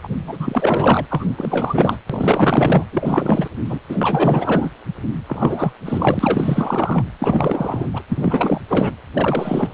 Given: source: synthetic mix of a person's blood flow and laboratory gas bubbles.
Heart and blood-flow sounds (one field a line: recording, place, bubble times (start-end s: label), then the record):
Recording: Doppler ultrasound of blood flow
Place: precordium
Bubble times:
0.02-0.08 s: bubbles
0.26-1.06 s: bubbles
1.09-1.32 s: bubbles
1.38-1.97 s: bubbles
2.10-2.85 s: bubbles
2.92-3.48 s: bubbles
3.65-3.79 s: bubbles
3.88-4.70 s: bubbles
5.28-5.72 s: bubbles
5.85-7.04 s: bubbles
7.19-8.02 s: bubbles
8.09-8.61 s: bubbles
8.69-8.92 s: bubbles
9.13-9.74 s: bubbles
From the record:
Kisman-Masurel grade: 444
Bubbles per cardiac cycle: continuous sound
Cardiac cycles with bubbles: 100%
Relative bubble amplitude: maximal (0.775 to 0.999)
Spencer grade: 4 (maximum detectable bubble signal sounding continuously throughout systole and diastole of every cardiac period, and overriding the amplitude of the normal cardiac signals)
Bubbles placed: anywhere in the cardiac cycle